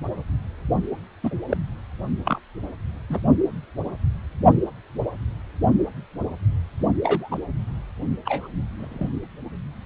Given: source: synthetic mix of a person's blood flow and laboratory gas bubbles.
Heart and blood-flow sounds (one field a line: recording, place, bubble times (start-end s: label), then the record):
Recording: Doppler ultrasound of blood flow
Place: precordium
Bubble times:
1.23-1.34 s: bubbles
1.50-1.57 s: bubbles
2.25-2.39 s: bubbles
3.10-3.20 s: bubbles
7.03-7.38 s: bubbles
8.25-8.47 s: bubbles
8.78-9.09 s: bubbles
From the record:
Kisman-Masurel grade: 122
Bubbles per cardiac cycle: 1 to 2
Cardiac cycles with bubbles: 10 to 50%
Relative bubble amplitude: moderate (0.250 to 0.450)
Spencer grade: 2 (many but less than half of the cardiac periods contain bubble signals, singularly or in groups)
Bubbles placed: only in the low amplitude regions of the cardiac cycle